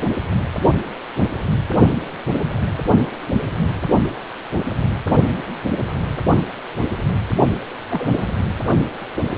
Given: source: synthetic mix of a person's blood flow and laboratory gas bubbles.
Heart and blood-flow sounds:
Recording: Doppler ultrasound of blood flow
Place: precordium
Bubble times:
7.90-8.27 s: bubbles
From the record:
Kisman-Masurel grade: 122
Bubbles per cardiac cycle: 1 to 2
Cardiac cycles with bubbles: 10 to 50%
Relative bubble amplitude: moderate (0.250 to 0.450)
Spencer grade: 2 (many but less than half of the cardiac periods contain bubble signals, singularly or in groups)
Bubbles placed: only in the low amplitude regions of the cardiac cycle

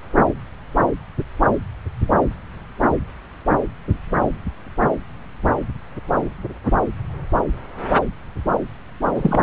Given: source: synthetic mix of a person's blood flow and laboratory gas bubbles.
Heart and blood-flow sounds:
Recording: Doppler ultrasound of blood flow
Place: subclavian vein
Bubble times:
9.15-9.43 s: bubbles
From the record:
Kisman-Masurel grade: 112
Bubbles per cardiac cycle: 1 to 2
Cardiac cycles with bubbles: 1 to 10%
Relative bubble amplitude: moderate (0.250 to 0.450)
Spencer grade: 1 (occasional bubble signal discernible with the cardiac motion signal, with majority of cardiac periods free of bubbles)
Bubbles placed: anywhere in the cardiac cycle

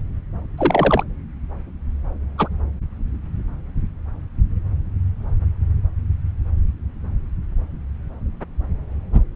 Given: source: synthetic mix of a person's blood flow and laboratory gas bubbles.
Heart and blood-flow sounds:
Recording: Doppler ultrasound of blood flow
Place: subclavian vein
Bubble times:
0.57-1.04 s: bubbles
2.38-2.48 s: bubbles
From the record:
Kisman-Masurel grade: 123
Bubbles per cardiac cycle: 1 to 2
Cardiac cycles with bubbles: 10 to 50%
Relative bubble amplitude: loud (0.450 to 0.775)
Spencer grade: 2 (many but less than half of the cardiac periods contain bubble signals, singularly or in groups)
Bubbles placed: anywhere in the cardiac cycle

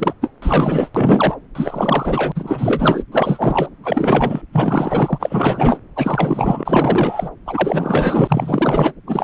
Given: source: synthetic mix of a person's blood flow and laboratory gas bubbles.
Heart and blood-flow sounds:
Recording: Doppler ultrasound of blood flow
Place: subclavian vein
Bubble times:
0.00-0.13 s: bubbles
0.21-0.31 s: bubbles
0.42-0.90 s: bubbles
0.95-1.35 s: bubbles
1.55-2.32 s: bubbles
2.35-3.03 s: bubbles
3.12-3.70 s: bubbles
3.83-4.42 s: bubbles
4.53-5.78 s: bubbles
5.96-7.30 s: bubbles
7.46-8.93 s: bubbles
9.07-9.24 s: bubbles
From the record:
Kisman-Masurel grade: 444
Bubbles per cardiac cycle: continuous sound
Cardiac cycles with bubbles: 100%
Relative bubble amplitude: maximal (0.775 to 0.999)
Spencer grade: 4 (maximum detectable bubble signal sounding continuously throughout systole and diastole of every cardiac period, and overriding the amplitude of the normal cardiac signals)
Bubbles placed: anywhere in the cardiac cycle

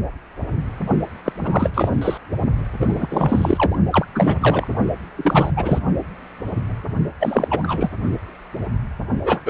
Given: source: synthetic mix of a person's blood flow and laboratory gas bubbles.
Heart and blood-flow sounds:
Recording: Doppler ultrasound of blood flow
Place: precordium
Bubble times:
1.24-1.70 s: bubbles
1.73-2.18 s: bubbles
2.79-3.79 s: bubbles
3.91-4.05 s: bubbles
4.14-4.37 s: bubbles
4.40-4.67 s: bubbles
5.16-5.52 s: bubbles
5.57-5.79 s: bubbles
7.20-7.90 s: bubbles
9.25-9.42 s: bubbles
9.45-9.50 s: bubbles
From the record:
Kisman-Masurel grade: 333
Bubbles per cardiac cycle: rolling drumbeat, 9 or more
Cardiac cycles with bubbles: 50 to 99%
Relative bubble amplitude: loud (0.450 to 0.775)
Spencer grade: 3 (all of the cardiac periods contain showers or single bubble signals, but not dominating or overriding the cardiac motion signals)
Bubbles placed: only in the low amplitude regions of the cardiac cycle

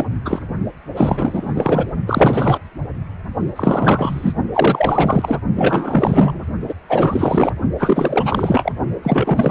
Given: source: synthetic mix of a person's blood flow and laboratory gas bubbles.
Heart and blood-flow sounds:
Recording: Doppler ultrasound of blood flow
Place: precordium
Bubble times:
0.00-0.05 s: bubbles
0.24-0.39 s: bubbles
0.96-1.86 s: bubbles
2.06-2.59 s: bubbles
3.55-4.33 s: bubbles
4.52-5.39 s: bubbles
5.56-6.41 s: bubbles
6.68-6.74 s: bubbles
6.89-7.53 s: bubbles
7.78-8.72 s: bubbles
9.03-9.51 s: bubbles
From the record:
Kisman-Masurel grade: 444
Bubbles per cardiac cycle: continuous sound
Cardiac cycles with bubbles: 100%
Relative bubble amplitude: maximal (0.775 to 0.999)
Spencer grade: 4 (maximum detectable bubble signal sounding continuously throughout systole and diastole of every cardiac period, and overriding the amplitude of the normal cardiac signals)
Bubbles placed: only in the low amplitude regions of the cardiac cycle

